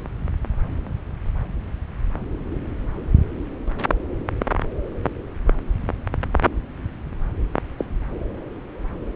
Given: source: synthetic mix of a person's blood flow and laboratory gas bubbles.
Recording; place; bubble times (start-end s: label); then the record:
Doppler ultrasound of blood flow; subclavian vein
7.78-7.85 s: bubbles
From the record:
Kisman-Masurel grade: 112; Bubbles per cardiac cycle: 1 to 2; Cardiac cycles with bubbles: 1 to 10%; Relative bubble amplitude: moderate (0.250 to 0.450); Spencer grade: 1 (occasional bubble signal discernible with the cardiac motion signal, with majority of cardiac periods free of bubbles); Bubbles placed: anywhere in the cardiac cycle